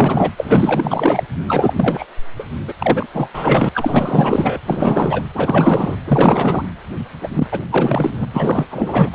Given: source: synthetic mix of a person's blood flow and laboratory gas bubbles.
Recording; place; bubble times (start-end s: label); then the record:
Doppler ultrasound of blood flow; precordium
0.00-0.32 s: bubbles
0.37-1.24 s: bubbles
1.47-2.06 s: bubbles
2.38-2.44 s: bubbles
2.67-2.73 s: bubbles
2.78-3.07 s: bubbles
3.13-3.30 s: bubbles
3.33-3.69 s: bubbles
3.74-4.60 s: bubbles
4.67-5.22 s: bubbles
5.34-5.96 s: bubbles
6.07-6.64 s: bubbles
7.21-7.29 s: bubbles
7.31-7.47 s: bubbles
7.51-7.60 s: bubbles
7.71-8.25 s: bubbles
8.33-8.65 s: bubbles
8.70-9.10 s: bubbles
9.12-9.15 s: bubbles
From the record:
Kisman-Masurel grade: 444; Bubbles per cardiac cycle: continuous sound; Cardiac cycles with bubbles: 100%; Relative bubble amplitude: maximal (0.775 to 0.999); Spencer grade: 4 (maximum detectable bubble signal sounding continuously throughout systole and diastole of every cardiac period, and overriding the amplitude of the normal cardiac signals); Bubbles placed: anywhere in the cardiac cycle